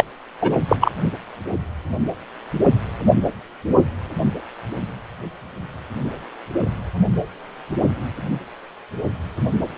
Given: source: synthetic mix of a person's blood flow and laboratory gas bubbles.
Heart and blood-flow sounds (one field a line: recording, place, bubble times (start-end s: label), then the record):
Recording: Doppler ultrasound of blood flow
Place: precordium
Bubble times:
0.00-0.04 s: bubbles
0.41-0.59 s: bubbles
0.68-0.76 s: bubbles
0.80-0.92 s: bubbles
From the record:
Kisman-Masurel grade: 223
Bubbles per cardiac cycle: several, 3 to 8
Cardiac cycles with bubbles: 10 to 50%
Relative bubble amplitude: loud (0.450 to 0.775)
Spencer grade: 2 (many but less than half of the cardiac periods contain bubble signals, singularly or in groups)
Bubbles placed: only in the low amplitude regions of the cardiac cycle